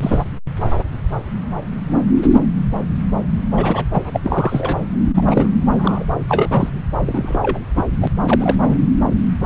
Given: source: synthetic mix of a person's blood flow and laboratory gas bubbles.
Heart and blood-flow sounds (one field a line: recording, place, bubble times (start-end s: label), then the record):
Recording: Doppler ultrasound of blood flow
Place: subclavian vein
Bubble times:
0.02-0.19 s: bubbles
3.57-3.85 s: bubbles
3.92-4.20 s: bubbles
4.23-4.77 s: bubbles
5.15-5.58 s: bubbles
5.70-6.05 s: bubbles
6.28-6.69 s: bubbles
7.06-7.59 s: bubbles
7.75-7.85 s: bubbles
8.00-8.07 s: bubbles
8.28-8.57 s: bubbles
8.62-8.90 s: bubbles
From the record:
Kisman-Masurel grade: 232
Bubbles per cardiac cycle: several, 3 to 8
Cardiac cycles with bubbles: 50 to 99%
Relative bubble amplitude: moderate (0.250 to 0.450)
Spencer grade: 3 (all of the cardiac periods contain showers or single bubble signals, but not dominating or overriding the cardiac motion signals)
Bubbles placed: anywhere in the cardiac cycle